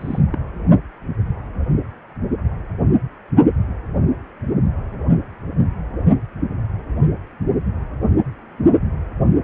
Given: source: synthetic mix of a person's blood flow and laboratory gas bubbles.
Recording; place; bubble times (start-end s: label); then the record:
Doppler ultrasound of blood flow; precordium
0.00-0.20 s: bubbles
0.32-0.39 s: bubbles
From the record:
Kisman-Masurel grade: 221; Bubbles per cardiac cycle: several, 3 to 8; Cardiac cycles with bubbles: 10 to 50%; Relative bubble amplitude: barely perceptible (0.100 to 0.250); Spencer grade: 2 (many but less than half of the cardiac periods contain bubble signals, singularly or in groups); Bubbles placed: only in the low amplitude regions of the cardiac cycle